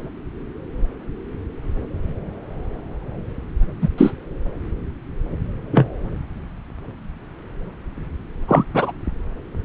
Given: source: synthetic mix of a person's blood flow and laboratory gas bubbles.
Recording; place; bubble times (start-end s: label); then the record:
Doppler ultrasound of blood flow; subclavian vein
3.81-3.88 s: bubbles
3.97-4.13 s: bubbles
5.71-5.87 s: bubbles
8.47-8.63 s: bubbles
8.74-8.91 s: bubbles
From the record:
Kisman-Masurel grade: 123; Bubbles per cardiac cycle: 1 to 2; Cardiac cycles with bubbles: 10 to 50%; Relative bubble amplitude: loud (0.450 to 0.775); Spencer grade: 2 (many but less than half of the cardiac periods contain bubble signals, singularly or in groups); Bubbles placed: anywhere in the cardiac cycle